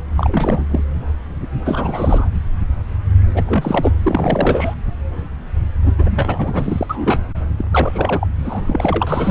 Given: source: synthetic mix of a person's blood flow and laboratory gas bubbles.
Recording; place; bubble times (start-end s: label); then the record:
Doppler ultrasound of blood flow; subclavian vein
0.17-0.66 s: bubbles
0.70-0.84 s: bubbles
1.65-2.28 s: bubbles
3.34-3.43 s: bubbles
3.46-3.92 s: bubbles
4.03-4.75 s: bubbles
5.85-5.92 s: bubbles
5.98-6.86 s: bubbles
6.89-7.21 s: bubbles
7.58-7.65 s: bubbles
7.71-8.28 s: bubbles
8.45-8.62 s: bubbles
8.67-9.31 s: bubbles
From the record:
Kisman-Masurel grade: 332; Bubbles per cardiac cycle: rolling drumbeat, 9 or more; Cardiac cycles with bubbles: 50 to 99%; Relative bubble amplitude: moderate (0.250 to 0.450); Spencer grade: 3 (all of the cardiac periods contain showers or single bubble signals, but not dominating or overriding the cardiac motion signals); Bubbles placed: anywhere in the cardiac cycle